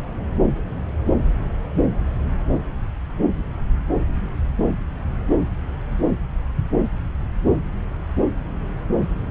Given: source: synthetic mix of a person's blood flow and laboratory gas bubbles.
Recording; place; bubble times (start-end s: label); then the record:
Doppler ultrasound of blood flow; subclavian vein
no bubbles
From the record:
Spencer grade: 0 (complete lack of bubble signals)